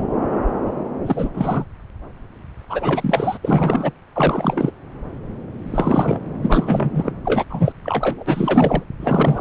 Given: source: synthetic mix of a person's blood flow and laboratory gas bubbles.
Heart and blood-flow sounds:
Doppler ultrasound of blood flow; subclavian vein
1.06-1.29 s: bubbles
1.33-1.65 s: bubbles
2.69-3.39 s: bubbles
3.42-3.92 s: bubbles
4.16-4.71 s: bubbles
5.70-6.20 s: bubbles
6.42-7.12 s: bubbles
7.25-7.45 s: bubbles
7.50-7.72 s: bubbles
7.83-8.83 s: bubbles
9.00-9.41 s: bubbles
From the record:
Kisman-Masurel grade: 333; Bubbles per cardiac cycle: rolling drumbeat, 9 or more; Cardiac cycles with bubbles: 50 to 99%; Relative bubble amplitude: loud (0.450 to 0.775); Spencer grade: 3 (all of the cardiac periods contain showers or single bubble signals, but not dominating or overriding the cardiac motion signals); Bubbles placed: anywhere in the cardiac cycle

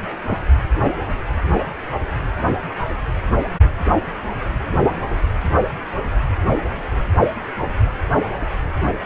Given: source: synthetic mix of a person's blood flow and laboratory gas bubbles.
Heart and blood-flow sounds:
Doppler ultrasound of blood flow; precordium
0.28-0.38 s: bubbles
From the record:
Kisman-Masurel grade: 111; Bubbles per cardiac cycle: 1 to 2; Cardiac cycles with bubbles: 1 to 10%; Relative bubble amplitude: barely perceptible (0.100 to 0.250); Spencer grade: 1 (occasional bubble signal discernible with the cardiac motion signal, with majority of cardiac periods free of bubbles); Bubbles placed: anywhere in the cardiac cycle

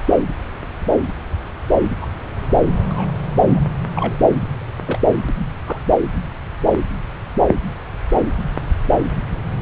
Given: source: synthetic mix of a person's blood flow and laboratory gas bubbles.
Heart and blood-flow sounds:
Doppler ultrasound of blood flow; subclavian vein
2.01-2.07 s: bubbles
2.89-3.12 s: bubbles
3.47-3.66 s: bubbles
3.95-4.14 s: bubbles
4.82-4.99 s: bubbles
5.66-5.79 s: bubbles
From the record:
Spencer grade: 2 (many but less than half of the cardiac periods contain bubble signals, singularly or in groups); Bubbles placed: anywhere in the cardiac cycle

